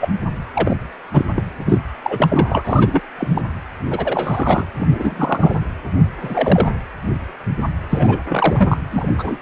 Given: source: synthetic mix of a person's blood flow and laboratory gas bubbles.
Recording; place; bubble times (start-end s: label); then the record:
Doppler ultrasound of blood flow; precordium
0.00-0.09 s: bubbles
0.54-0.77 s: bubbles
1.12-1.25 s: bubbles
1.35-1.44 s: bubbles
1.67-1.79 s: bubbles
2.04-2.62 s: bubbles
2.65-3.02 s: bubbles
3.18-3.42 s: bubbles
3.90-4.67 s: bubbles
4.77-5.56 s: bubbles
6.22-6.71 s: bubbles
7.89-8.18 s: bubbles
8.29-8.78 s: bubbles
8.90-9.09 s: bubbles
9.17-9.38 s: bubbles
From the record:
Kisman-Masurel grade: 233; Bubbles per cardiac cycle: several, 3 to 8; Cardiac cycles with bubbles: 50 to 99%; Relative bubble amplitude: loud (0.450 to 0.775); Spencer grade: 3 (all of the cardiac periods contain showers or single bubble signals, but not dominating or overriding the cardiac motion signals); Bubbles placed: anywhere in the cardiac cycle